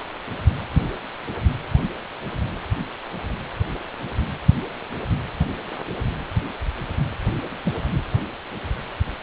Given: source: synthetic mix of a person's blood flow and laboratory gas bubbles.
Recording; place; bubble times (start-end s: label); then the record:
Doppler ultrasound of blood flow; precordium
7.65-7.74 s: bubbles
From the record:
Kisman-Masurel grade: 111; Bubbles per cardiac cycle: 1 to 2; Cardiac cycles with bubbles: 1 to 10%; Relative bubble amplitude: barely perceptible (0.100 to 0.250); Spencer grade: 1 (occasional bubble signal discernible with the cardiac motion signal, with majority of cardiac periods free of bubbles); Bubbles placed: anywhere in the cardiac cycle